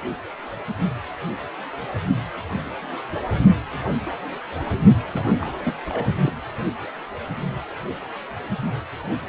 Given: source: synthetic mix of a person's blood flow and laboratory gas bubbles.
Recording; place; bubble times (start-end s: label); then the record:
Doppler ultrasound of blood flow; precordium
5.12-5.53 s: bubbles
5.63-5.73 s: bubbles
5.88-6.13 s: bubbles
6.23-6.31 s: bubbles
From the record:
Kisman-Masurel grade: 211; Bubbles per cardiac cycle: several, 3 to 8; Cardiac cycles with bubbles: 1 to 10%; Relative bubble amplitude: barely perceptible (0.100 to 0.250); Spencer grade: 1 (occasional bubble signal discernible with the cardiac motion signal, with majority of cardiac periods free of bubbles); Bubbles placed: anywhere in the cardiac cycle